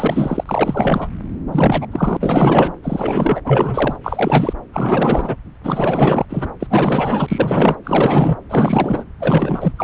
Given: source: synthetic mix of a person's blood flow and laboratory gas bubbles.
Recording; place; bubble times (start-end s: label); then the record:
Doppler ultrasound of blood flow; subclavian vein
0.00-1.09 s: bubbles
1.52-1.86 s: bubbles
1.92-2.17 s: bubbles
2.20-2.73 s: bubbles
2.83-3.42 s: bubbles
3.44-3.96 s: bubbles
4.03-4.53 s: bubbles
4.72-5.36 s: bubbles
5.63-6.25 s: bubbles
6.29-6.53 s: bubbles
6.60-6.67 s: bubbles
6.70-7.78 s: bubbles
7.83-8.37 s: bubbles
8.49-9.04 s: bubbles
9.20-9.72 s: bubbles
9.77-9.84 s: bubbles
From the record:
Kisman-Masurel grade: 444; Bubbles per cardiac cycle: continuous sound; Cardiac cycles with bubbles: 100%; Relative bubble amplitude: maximal (0.775 to 0.999); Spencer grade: 4 (maximum detectable bubble signal sounding continuously throughout systole and diastole of every cardiac period, and overriding the amplitude of the normal cardiac signals); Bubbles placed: anywhere in the cardiac cycle